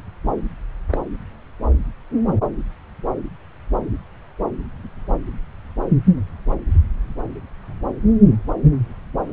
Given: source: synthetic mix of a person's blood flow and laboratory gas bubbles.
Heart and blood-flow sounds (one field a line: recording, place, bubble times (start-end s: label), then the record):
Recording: Doppler ultrasound of blood flow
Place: subclavian vein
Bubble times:
0.91-0.99 s: bubbles
From the record:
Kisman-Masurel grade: 112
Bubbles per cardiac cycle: 1 to 2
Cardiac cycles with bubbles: 1 to 10%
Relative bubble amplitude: moderate (0.250 to 0.450)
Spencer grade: 1 (occasional bubble signal discernible with the cardiac motion signal, with majority of cardiac periods free of bubbles)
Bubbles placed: anywhere in the cardiac cycle